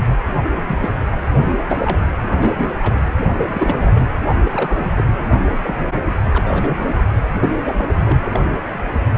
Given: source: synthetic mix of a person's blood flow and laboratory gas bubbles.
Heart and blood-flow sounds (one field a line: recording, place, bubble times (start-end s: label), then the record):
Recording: Doppler ultrasound of blood flow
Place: precordium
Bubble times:
0.68-0.79 s: bubbles
0.82-0.96 s: bubbles
1.16-1.18 s: bubbles
1.39-1.56 s: bubbles
1.69-2.00 s: bubbles
2.23-2.27 s: bubbles
2.42-2.73 s: bubbles
2.83-2.95 s: bubbles
3.26-3.37 s: bubbles
3.42-4.01 s: bubbles
4.38-4.93 s: bubbles
4.97-5.02 s: bubbles
5.30-5.38 s: bubbles
5.45-5.57 s: bubbles
5.63-5.86 s: bubbles
6.33-6.72 s: bubbles
6.78-7.05 s: bubbles
7.37-7.50 s: bubbles
7.65-8.18 s: bubbles
8.23-8.43 s: bubbles
From the record:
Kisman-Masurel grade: 242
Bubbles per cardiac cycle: several, 3 to 8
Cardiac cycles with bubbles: 100%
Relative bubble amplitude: moderate (0.250 to 0.450)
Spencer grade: 3 (all of the cardiac periods contain showers or single bubble signals, but not dominating or overriding the cardiac motion signals)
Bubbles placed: anywhere in the cardiac cycle